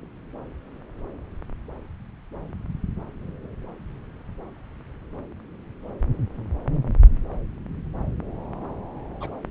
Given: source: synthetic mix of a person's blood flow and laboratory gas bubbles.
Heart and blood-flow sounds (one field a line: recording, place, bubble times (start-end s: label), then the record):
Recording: Doppler ultrasound of blood flow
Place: subclavian vein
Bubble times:
9.21-9.29 s: bubbles
From the record:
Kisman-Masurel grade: 111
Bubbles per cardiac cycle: 1 to 2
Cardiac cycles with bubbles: 1 to 10%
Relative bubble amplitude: barely perceptible (0.100 to 0.250)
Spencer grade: 1 (occasional bubble signal discernible with the cardiac motion signal, with majority of cardiac periods free of bubbles)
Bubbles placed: anywhere in the cardiac cycle